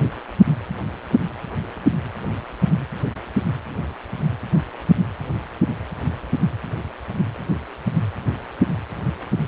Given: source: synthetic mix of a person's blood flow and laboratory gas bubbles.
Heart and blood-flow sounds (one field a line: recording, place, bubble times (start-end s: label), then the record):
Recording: Doppler ultrasound of blood flow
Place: precordium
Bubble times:
no bubbles
From the record:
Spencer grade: 0 (complete lack of bubble signals)